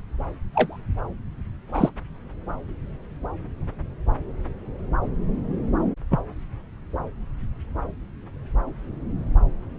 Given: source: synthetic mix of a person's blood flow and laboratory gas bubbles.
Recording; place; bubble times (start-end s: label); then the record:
Doppler ultrasound of blood flow; subclavian vein
0.54-0.78 s: bubbles
1.67-1.91 s: bubbles
6.10-6.20 s: bubbles
From the record:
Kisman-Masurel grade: 123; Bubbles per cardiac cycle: 1 to 2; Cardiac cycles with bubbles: 10 to 50%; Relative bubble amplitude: loud (0.450 to 0.775); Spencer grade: 2 (many but less than half of the cardiac periods contain bubble signals, singularly or in groups); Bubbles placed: anywhere in the cardiac cycle